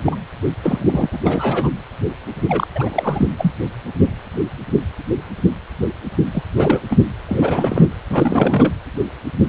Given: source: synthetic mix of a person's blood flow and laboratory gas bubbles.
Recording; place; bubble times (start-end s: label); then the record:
Doppler ultrasound of blood flow; precordium
0.05-0.16 s: bubbles
0.63-1.09 s: bubbles
1.12-1.19 s: bubbles
1.24-1.70 s: bubbles
2.48-2.68 s: bubbles
2.75-3.27 s: bubbles
3.38-3.52 s: bubbles
6.32-6.43 s: bubbles
6.56-6.80 s: bubbles
6.90-7.00 s: bubbles
7.26-7.86 s: bubbles
8.10-8.73 s: bubbles
From the record:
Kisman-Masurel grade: 332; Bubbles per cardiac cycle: rolling drumbeat, 9 or more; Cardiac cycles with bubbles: 50 to 99%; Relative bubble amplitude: moderate (0.250 to 0.450); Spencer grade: 3 (all of the cardiac periods contain showers or single bubble signals, but not dominating or overriding the cardiac motion signals); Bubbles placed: anywhere in the cardiac cycle